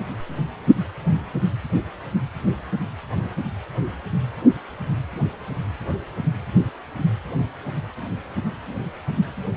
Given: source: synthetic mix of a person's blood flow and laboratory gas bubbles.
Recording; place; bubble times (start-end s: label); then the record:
Doppler ultrasound of blood flow; precordium
no bubbles
From the record:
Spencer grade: 0 (complete lack of bubble signals)